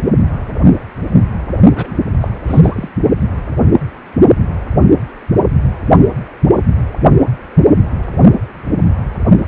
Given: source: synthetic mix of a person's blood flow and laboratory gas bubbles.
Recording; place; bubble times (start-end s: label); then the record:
Doppler ultrasound of blood flow; precordium
1.75-2.00 s: bubbles
2.21-2.28 s: bubbles
2.47-2.89 s: bubbles
From the record:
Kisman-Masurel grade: 212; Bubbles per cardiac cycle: several, 3 to 8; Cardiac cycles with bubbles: 1 to 10%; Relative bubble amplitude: moderate (0.250 to 0.450); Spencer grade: 1 (occasional bubble signal discernible with the cardiac motion signal, with majority of cardiac periods free of bubbles); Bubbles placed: only in the low amplitude regions of the cardiac cycle